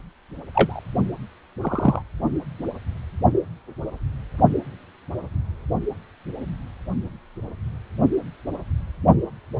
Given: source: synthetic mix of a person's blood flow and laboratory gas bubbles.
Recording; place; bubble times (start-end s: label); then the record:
Doppler ultrasound of blood flow; precordium
0.54-0.80 s: bubbles
1.61-2.02 s: bubbles
From the record:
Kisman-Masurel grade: 123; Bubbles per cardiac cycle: 1 to 2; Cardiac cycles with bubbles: 10 to 50%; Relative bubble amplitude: loud (0.450 to 0.775); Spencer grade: 2 (many but less than half of the cardiac periods contain bubble signals, singularly or in groups); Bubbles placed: only in the low amplitude regions of the cardiac cycle